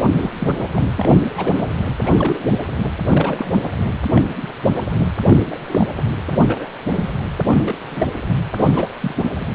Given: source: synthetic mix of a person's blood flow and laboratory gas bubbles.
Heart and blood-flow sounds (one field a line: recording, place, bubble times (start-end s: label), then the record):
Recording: Doppler ultrasound of blood flow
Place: precordium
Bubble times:
0.20-0.30 s: bubbles
0.39-0.92 s: bubbles
0.97-1.09 s: bubbles
1.33-1.66 s: bubbles
2.02-2.40 s: bubbles
2.50-2.58 s: bubbles
3.08-3.51 s: bubbles
4.08-4.23 s: bubbles
4.42-4.53 s: bubbles
5.00-5.05 s: bubbles
5.27-5.42 s: bubbles
5.49-5.56 s: bubbles
5.70-5.87 s: bubbles
6.28-6.69 s: bubbles
6.96-7.10 s: bubbles
7.47-8.07 s: bubbles
8.29-8.45 s: bubbles
8.55-8.91 s: bubbles
9.00-9.14 s: bubbles
9.38-9.46 s: bubbles
From the record:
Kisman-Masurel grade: 232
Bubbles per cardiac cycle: several, 3 to 8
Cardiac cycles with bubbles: 50 to 99%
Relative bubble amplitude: moderate (0.250 to 0.450)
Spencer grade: 3 (all of the cardiac periods contain showers or single bubble signals, but not dominating or overriding the cardiac motion signals)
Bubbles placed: anywhere in the cardiac cycle